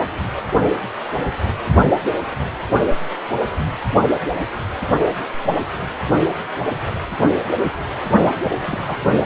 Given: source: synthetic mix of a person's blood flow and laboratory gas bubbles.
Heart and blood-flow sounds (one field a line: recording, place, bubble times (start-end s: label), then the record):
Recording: Doppler ultrasound of blood flow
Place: precordium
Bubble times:
8.24-8.33 s: bubbles
8.43-8.54 s: bubbles
8.58-8.97 s: bubbles
9.00-9.26 s: bubbles
From the record:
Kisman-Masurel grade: 211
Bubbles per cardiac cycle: several, 3 to 8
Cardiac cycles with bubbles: 1 to 10%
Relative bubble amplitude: barely perceptible (0.100 to 0.250)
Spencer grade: 1 (occasional bubble signal discernible with the cardiac motion signal, with majority of cardiac periods free of bubbles)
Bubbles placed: only in the low amplitude regions of the cardiac cycle